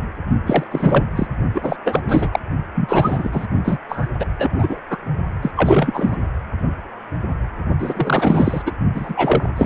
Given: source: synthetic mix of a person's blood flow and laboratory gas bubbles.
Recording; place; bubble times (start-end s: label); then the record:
Doppler ultrasound of blood flow; precordium
0.46-0.64 s: bubbles
0.70-1.04 s: bubbles
1.16-1.27 s: bubbles
1.54-1.76 s: bubbles
1.84-2.01 s: bubbles
2.08-2.40 s: bubbles
2.75-3.46 s: bubbles
3.64-3.79 s: bubbles
3.88-4.08 s: bubbles
4.20-4.26 s: bubbles
4.39-4.80 s: bubbles
4.90-4.98 s: bubbles
5.42-5.52 s: bubbles
5.56-6.18 s: bubbles
7.79-8.62 s: bubbles
8.66-8.72 s: bubbles
8.95-9.49 s: bubbles
9.56-9.66 s: bubbles
From the record:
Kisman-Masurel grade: 333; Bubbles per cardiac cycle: rolling drumbeat, 9 or more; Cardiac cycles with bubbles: 50 to 99%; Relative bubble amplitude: loud (0.450 to 0.775); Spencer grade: 3 (all of the cardiac periods contain showers or single bubble signals, but not dominating or overriding the cardiac motion signals); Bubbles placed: only in the low amplitude regions of the cardiac cycle